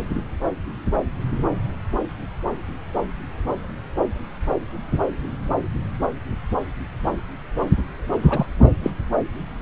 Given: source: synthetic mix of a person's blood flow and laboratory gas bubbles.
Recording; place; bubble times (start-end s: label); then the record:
Doppler ultrasound of blood flow; subclavian vein
8.22-8.46 s: bubbles
8.83-8.92 s: bubbles
From the record:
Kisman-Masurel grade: 112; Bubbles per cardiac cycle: 1 to 2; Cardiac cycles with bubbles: 1 to 10%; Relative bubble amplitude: moderate (0.250 to 0.450); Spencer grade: 1 (occasional bubble signal discernible with the cardiac motion signal, with majority of cardiac periods free of bubbles); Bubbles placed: anywhere in the cardiac cycle